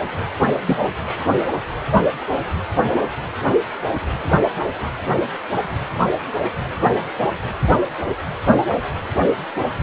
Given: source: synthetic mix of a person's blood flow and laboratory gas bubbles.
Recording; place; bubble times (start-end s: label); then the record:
Doppler ultrasound of blood flow; precordium
0.66-0.80 s: bubbles
From the record:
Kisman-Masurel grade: 112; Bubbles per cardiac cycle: 1 to 2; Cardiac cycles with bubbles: 1 to 10%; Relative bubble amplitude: moderate (0.250 to 0.450); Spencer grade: 1 (occasional bubble signal discernible with the cardiac motion signal, with majority of cardiac periods free of bubbles); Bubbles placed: anywhere in the cardiac cycle